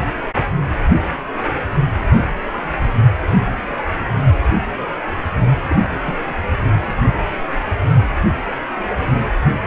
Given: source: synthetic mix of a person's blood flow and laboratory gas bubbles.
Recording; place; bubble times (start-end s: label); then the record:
Doppler ultrasound of blood flow; precordium
5.68-5.76 s: bubbles
6.03-6.35 s: bubbles
6.61-6.67 s: bubbles
From the record:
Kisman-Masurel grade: 211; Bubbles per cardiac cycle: several, 3 to 8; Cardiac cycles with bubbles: 1 to 10%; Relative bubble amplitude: barely perceptible (0.100 to 0.250); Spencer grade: 1 (occasional bubble signal discernible with the cardiac motion signal, with majority of cardiac periods free of bubbles); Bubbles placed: anywhere in the cardiac cycle